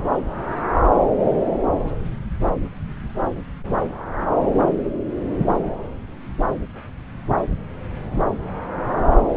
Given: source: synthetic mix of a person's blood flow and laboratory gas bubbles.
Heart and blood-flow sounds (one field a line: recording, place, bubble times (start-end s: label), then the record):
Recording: Doppler ultrasound of blood flow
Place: subclavian vein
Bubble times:
no bubbles
From the record:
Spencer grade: 0 (complete lack of bubble signals)